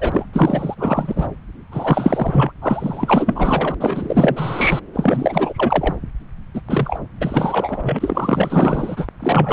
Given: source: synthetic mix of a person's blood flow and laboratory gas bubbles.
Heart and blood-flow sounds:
Doppler ultrasound of blood flow; subclavian vein
0.00-0.26 s: bubbles
0.33-1.28 s: bubbles
1.71-2.52 s: bubbles
2.61-3.74 s: bubbles
3.81-4.81 s: bubbles
4.93-5.95 s: bubbles
6.54-6.61 s: bubbles
6.69-7.00 s: bubbles
7.21-9.07 s: bubbles
9.20-9.53 s: bubbles
From the record:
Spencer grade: 4 (maximum detectable bubble signal sounding continuously throughout systole and diastole of every cardiac period, and overriding the amplitude of the normal cardiac signals); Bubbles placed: anywhere in the cardiac cycle

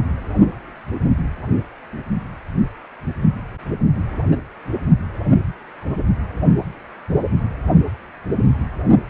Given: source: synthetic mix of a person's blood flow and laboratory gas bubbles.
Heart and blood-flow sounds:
Doppler ultrasound of blood flow; precordium
4.31-4.36 s: bubbles
From the record:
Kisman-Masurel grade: 112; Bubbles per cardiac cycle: 1 to 2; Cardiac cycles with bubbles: 1 to 10%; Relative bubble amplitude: moderate (0.250 to 0.450); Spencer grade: 1 (occasional bubble signal discernible with the cardiac motion signal, with majority of cardiac periods free of bubbles); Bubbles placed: anywhere in the cardiac cycle

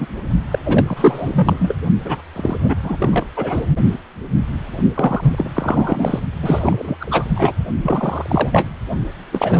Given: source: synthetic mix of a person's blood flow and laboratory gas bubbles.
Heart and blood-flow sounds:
Doppler ultrasound of blood flow; precordium
0.00-0.08 s: bubbles
0.51-0.59 s: bubbles
0.65-1.74 s: bubbles
2.04-2.21 s: bubbles
2.36-2.57 s: bubbles
2.62-2.75 s: bubbles
2.82-3.26 s: bubbles
3.37-3.62 s: bubbles
4.94-5.51 s: bubbles
5.54-6.20 s: bubbles
6.42-6.97 s: bubbles
7.00-7.31 s: bubbles
7.36-7.53 s: bubbles
7.83-8.69 s: bubbles
9.31-9.60 s: bubbles
From the record:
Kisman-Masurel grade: 333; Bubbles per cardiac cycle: rolling drumbeat, 9 or more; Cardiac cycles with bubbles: 50 to 99%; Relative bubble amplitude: loud (0.450 to 0.775); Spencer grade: 3 (all of the cardiac periods contain showers or single bubble signals, but not dominating or overriding the cardiac motion signals); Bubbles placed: only in the low amplitude regions of the cardiac cycle

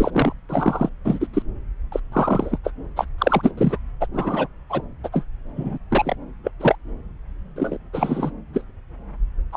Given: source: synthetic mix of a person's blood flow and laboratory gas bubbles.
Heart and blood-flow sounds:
Doppler ultrasound of blood flow; subclavian vein
0.00-0.33 s: bubbles
0.49-0.90 s: bubbles
1.05-1.27 s: bubbles
1.33-1.43 s: bubbles
1.92-2.00 s: bubbles
2.12-2.58 s: bubbles
2.64-2.71 s: bubbles
2.96-3.06 s: bubbles
3.18-3.52 s: bubbles
3.57-3.78 s: bubbles
4.00-4.06 s: bubbles
4.13-4.47 s: bubbles
4.70-4.82 s: bubbles
5.04-5.08 s: bubbles
5.12-5.24 s: bubbles
5.56-5.78 s: bubbles
5.91-6.15 s: bubbles
6.44-6.51 s: bubbles
6.59-6.75 s: bubbles
7.56-7.78 s: bubbles
7.93-8.30 s: bubbles
8.54-8.62 s: bubbles
9.53-9.57 s: bubbles
From the record:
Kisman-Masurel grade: 242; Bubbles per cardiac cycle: several, 3 to 8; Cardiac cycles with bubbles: 100%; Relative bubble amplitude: moderate (0.250 to 0.450); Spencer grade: 3 (all of the cardiac periods contain showers or single bubble signals, but not dominating or overriding the cardiac motion signals); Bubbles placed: anywhere in the cardiac cycle

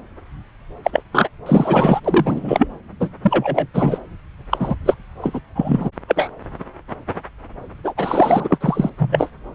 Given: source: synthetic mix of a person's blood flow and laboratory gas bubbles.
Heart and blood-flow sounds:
Doppler ultrasound of blood flow; subclavian vein
0.84-1.03 s: bubbles
1.12-1.30 s: bubbles
1.46-2.00 s: bubbles
2.04-2.68 s: bubbles
3.00-3.09 s: bubbles
3.22-3.67 s: bubbles
3.73-4.00 s: bubbles
4.50-4.75 s: bubbles
4.85-4.94 s: bubbles
5.21-5.41 s: bubbles
5.55-5.89 s: bubbles
6.08-6.30 s: bubbles
7.83-7.93 s: bubbles
7.96-8.58 s: bubbles
8.61-8.90 s: bubbles
8.99-9.30 s: bubbles
From the record:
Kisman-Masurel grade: 333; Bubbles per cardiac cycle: rolling drumbeat, 9 or more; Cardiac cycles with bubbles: 50 to 99%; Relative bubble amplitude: loud (0.450 to 0.775); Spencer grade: 3 (all of the cardiac periods contain showers or single bubble signals, but not dominating or overriding the cardiac motion signals); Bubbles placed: anywhere in the cardiac cycle

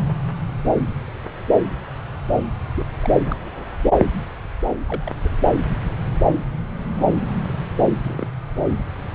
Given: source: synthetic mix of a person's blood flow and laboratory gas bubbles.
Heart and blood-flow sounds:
Doppler ultrasound of blood flow; subclavian vein
2.75-2.85 s: bubbles
3.00-3.09 s: bubbles
3.25-3.77 s: bubbles
4.86-5.12 s: bubbles
5.25-5.36 s: bubbles
8.04-8.28 s: bubbles
From the record:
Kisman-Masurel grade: 121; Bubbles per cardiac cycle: 1 to 2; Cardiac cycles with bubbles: 10 to 50%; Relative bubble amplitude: barely perceptible (0.100 to 0.250); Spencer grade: 2 (many but less than half of the cardiac periods contain bubble signals, singularly or in groups); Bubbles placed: anywhere in the cardiac cycle

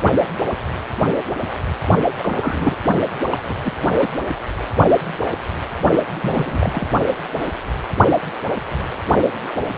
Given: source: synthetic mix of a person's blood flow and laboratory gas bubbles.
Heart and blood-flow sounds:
Doppler ultrasound of blood flow; precordium
2.18-2.76 s: bubbles
3.27-3.42 s: bubbles
3.45-3.56 s: bubbles
3.64-3.73 s: bubbles
3.99-4.08 s: bubbles
6.21-6.88 s: bubbles
From the record:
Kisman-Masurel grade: 222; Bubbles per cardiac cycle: several, 3 to 8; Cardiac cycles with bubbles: 10 to 50%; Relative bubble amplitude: moderate (0.250 to 0.450); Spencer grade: 2 (many but less than half of the cardiac periods contain bubble signals, singularly or in groups); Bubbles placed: only in the low amplitude regions of the cardiac cycle

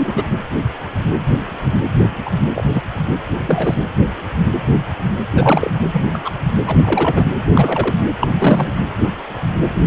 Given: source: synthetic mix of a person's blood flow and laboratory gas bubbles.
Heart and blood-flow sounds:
Doppler ultrasound of blood flow; precordium
0.00-0.23 s: bubbles
2.25-2.30 s: bubbles
2.54-2.65 s: bubbles
2.73-2.83 s: bubbles
3.46-3.75 s: bubbles
5.35-5.71 s: bubbles
5.93-6.06 s: bubbles
6.14-6.21 s: bubbles
6.25-6.32 s: bubbles
6.67-7.26 s: bubbles
7.54-7.97 s: bubbles
8.21-8.27 s: bubbles
8.30-8.70 s: bubbles
From the record:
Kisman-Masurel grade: 233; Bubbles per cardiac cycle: several, 3 to 8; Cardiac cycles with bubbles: 50 to 99%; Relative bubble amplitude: loud (0.450 to 0.775); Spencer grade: 3 (all of the cardiac periods contain showers or single bubble signals, but not dominating or overriding the cardiac motion signals); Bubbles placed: anywhere in the cardiac cycle

